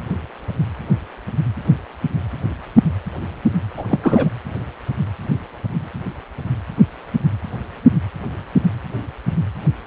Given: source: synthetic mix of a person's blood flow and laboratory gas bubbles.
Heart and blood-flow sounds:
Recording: Doppler ultrasound of blood flow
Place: precordium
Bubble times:
3.77-3.85 s: bubbles
3.90-3.99 s: bubbles
4.03-4.29 s: bubbles
From the record:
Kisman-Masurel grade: 212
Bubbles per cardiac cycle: several, 3 to 8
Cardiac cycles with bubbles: 1 to 10%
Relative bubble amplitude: moderate (0.250 to 0.450)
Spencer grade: 1 (occasional bubble signal discernible with the cardiac motion signal, with majority of cardiac periods free of bubbles)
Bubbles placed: anywhere in the cardiac cycle

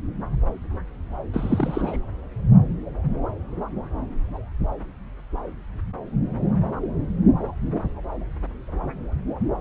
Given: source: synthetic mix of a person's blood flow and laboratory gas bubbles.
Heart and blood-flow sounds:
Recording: Doppler ultrasound of blood flow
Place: subclavian vein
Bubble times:
1.33-2.00 s: bubbles
From the record:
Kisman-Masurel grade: 211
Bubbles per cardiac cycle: several, 3 to 8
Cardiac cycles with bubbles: 1 to 10%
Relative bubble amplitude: barely perceptible (0.100 to 0.250)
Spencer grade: 1 (occasional bubble signal discernible with the cardiac motion signal, with majority of cardiac periods free of bubbles)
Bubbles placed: anywhere in the cardiac cycle

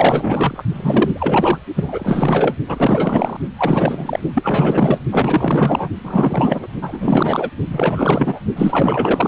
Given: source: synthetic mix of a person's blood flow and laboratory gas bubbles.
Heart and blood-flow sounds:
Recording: Doppler ultrasound of blood flow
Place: precordium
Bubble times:
0.00-0.64 s: bubbles
0.73-1.58 s: bubbles
1.76-2.55 s: bubbles
2.67-3.37 s: bubbles
3.58-4.19 s: bubbles
4.34-5.00 s: bubbles
5.11-5.88 s: bubbles
6.04-6.67 s: bubbles
6.81-7.50 s: bubbles
7.71-8.40 s: bubbles
8.55-9.28 s: bubbles
From the record:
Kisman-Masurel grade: 444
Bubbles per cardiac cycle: continuous sound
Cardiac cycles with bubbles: 100%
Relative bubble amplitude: maximal (0.775 to 0.999)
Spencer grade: 4 (maximum detectable bubble signal sounding continuously throughout systole and diastole of every cardiac period, and overriding the amplitude of the normal cardiac signals)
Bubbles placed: only in the low amplitude regions of the cardiac cycle

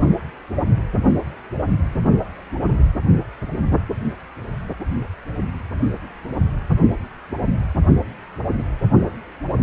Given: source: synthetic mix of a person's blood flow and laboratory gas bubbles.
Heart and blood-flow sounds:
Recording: Doppler ultrasound of blood flow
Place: precordium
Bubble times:
no bubbles
From the record:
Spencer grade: 0 (complete lack of bubble signals)

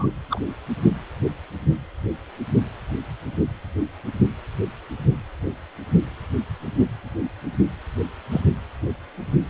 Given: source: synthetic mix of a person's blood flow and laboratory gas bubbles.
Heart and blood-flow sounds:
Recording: Doppler ultrasound of blood flow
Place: precordium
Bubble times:
0.00-0.07 s: bubbles
0.30-0.40 s: bubbles
8.31-8.41 s: bubbles
From the record:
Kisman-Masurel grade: 122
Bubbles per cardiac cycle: 1 to 2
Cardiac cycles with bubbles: 10 to 50%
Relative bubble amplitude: moderate (0.250 to 0.450)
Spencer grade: 2 (many but less than half of the cardiac periods contain bubble signals, singularly or in groups)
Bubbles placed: anywhere in the cardiac cycle

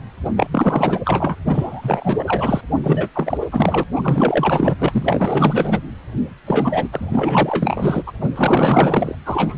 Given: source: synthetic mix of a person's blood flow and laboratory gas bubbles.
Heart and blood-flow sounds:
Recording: Doppler ultrasound of blood flow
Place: precordium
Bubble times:
0.25-0.30 s: bubbles
0.36-0.47 s: bubbles
0.52-1.00 s: bubbles
1.04-1.35 s: bubbles
1.45-2.61 s: bubbles
2.83-3.09 s: bubbles
3.14-3.38 s: bubbles
3.40-3.48 s: bubbles
3.52-3.83 s: bubbles
3.95-4.76 s: bubbles
4.79-5.79 s: bubbles
6.46-6.88 s: bubbles
6.92-8.03 s: bubbles
8.06-8.12 s: bubbles
8.21-8.30 s: bubbles
8.36-9.15 s: bubbles
9.25-9.58 s: bubbles
From the record:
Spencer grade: 4 (maximum detectable bubble signal sounding continuously throughout systole and diastole of every cardiac period, and overriding the amplitude of the normal cardiac signals)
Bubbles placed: anywhere in the cardiac cycle

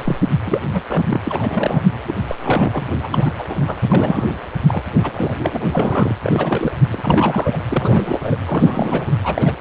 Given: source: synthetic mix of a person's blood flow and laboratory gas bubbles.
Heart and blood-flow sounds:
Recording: Doppler ultrasound of blood flow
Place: precordium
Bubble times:
0.00-0.16 s: bubbles
0.46-0.59 s: bubbles
0.73-0.81 s: bubbles
0.89-1.04 s: bubbles
1.09-1.21 s: bubbles
1.24-1.82 s: bubbles
2.06-2.15 s: bubbles
2.28-2.35 s: bubbles
2.42-2.85 s: bubbles
3.03-3.32 s: bubbles
3.38-3.46 s: bubbles
3.49-3.55 s: bubbles
3.58-3.80 s: bubbles
3.89-4.37 s: bubbles
4.67-4.83 s: bubbles
4.94-5.34 s: bubbles
5.37-5.58 s: bubbles
5.61-6.13 s: bubbles
6.22-6.76 s: bubbles
6.91-7.62 s: bubbles
7.68-8.38 s: bubbles
8.46-9.14 s: bubbles
9.24-9.53 s: bubbles
From the record:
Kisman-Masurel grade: 342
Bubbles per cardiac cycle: rolling drumbeat, 9 or more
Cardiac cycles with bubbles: 100%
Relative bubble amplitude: moderate (0.250 to 0.450)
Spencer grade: 3 (all of the cardiac periods contain showers or single bubble signals, but not dominating or overriding the cardiac motion signals)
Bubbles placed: anywhere in the cardiac cycle

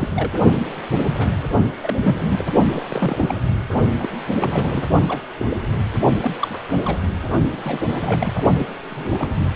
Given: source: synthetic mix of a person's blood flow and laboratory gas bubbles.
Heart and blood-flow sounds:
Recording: Doppler ultrasound of blood flow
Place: precordium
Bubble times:
0.00-0.09 s: bubbles
0.15-0.30 s: bubbles
1.05-1.14 s: bubbles
1.17-1.29 s: bubbles
1.83-2.45 s: bubbles
2.72-2.84 s: bubbles
2.90-3.35 s: bubbles
3.99-4.09 s: bubbles
4.39-4.86 s: bubbles
5.07-5.22 s: bubbles
5.38-5.46 s: bubbles
5.48-5.57 s: bubbles
6.21-6.58 s: bubbles
6.85-6.98 s: bubbles
7.07-7.14 s: bubbles
7.51-7.81 s: bubbles
7.87-8.42 s: bubbles
8.58-8.68 s: bubbles
8.90-9.29 s: bubbles
From the record:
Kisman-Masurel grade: 242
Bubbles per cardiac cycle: several, 3 to 8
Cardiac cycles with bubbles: 100%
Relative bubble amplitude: moderate (0.250 to 0.450)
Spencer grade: 3 (all of the cardiac periods contain showers or single bubble signals, but not dominating or overriding the cardiac motion signals)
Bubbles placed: only in the low amplitude regions of the cardiac cycle

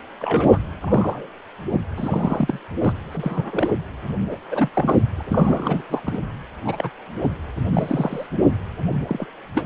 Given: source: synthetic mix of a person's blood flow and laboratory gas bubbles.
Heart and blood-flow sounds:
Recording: Doppler ultrasound of blood flow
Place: precordium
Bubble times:
0.19-0.59 s: bubbles
0.82-1.27 s: bubbles
1.70-1.81 s: bubbles
1.97-2.60 s: bubbles
2.82-2.92 s: bubbles
3.12-3.70 s: bubbles
4.30-4.38 s: bubbles
4.51-4.70 s: bubbles
4.74-5.03 s: bubbles
5.17-5.23 s: bubbles
5.26-5.83 s: bubbles
5.90-6.00 s: bubbles
6.04-6.19 s: bubbles
6.65-6.90 s: bubbles
7.22-7.28 s: bubbles
7.74-8.27 s: bubbles
9.07-9.26 s: bubbles
9.54-9.66 s: bubbles
From the record:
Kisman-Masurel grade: 242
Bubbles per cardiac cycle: several, 3 to 8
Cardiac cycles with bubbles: 100%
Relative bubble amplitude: moderate (0.250 to 0.450)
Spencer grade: 3 (all of the cardiac periods contain showers or single bubble signals, but not dominating or overriding the cardiac motion signals)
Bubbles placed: anywhere in the cardiac cycle

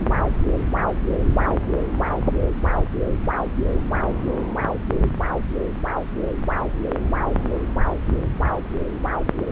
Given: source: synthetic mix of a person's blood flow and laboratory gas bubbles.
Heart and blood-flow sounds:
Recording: Doppler ultrasound of blood flow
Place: subclavian vein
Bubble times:
no bubbles
From the record:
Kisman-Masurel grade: 000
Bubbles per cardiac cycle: 0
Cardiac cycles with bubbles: 0%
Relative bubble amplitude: no bubbles discernible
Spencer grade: 0 (complete lack of bubble signals)

